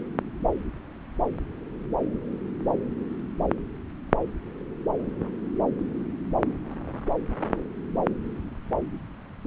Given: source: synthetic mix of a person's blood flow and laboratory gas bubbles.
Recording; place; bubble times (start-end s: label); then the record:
Doppler ultrasound of blood flow; subclavian vein
no bubbles
From the record:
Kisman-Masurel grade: 000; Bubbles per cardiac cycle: 0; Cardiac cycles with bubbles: 0%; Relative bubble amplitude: no bubbles discernible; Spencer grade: 0 (complete lack of bubble signals)